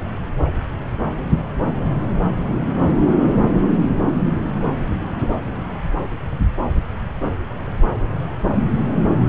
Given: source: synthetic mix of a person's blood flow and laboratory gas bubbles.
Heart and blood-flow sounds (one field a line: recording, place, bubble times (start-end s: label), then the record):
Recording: Doppler ultrasound of blood flow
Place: subclavian vein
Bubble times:
8.73-8.82 s: bubbles
8.96-9.08 s: bubbles
From the record:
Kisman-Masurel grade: 111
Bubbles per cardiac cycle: 1 to 2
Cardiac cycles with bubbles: 1 to 10%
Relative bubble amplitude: barely perceptible (0.100 to 0.250)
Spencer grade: 1 (occasional bubble signal discernible with the cardiac motion signal, with majority of cardiac periods free of bubbles)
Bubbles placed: anywhere in the cardiac cycle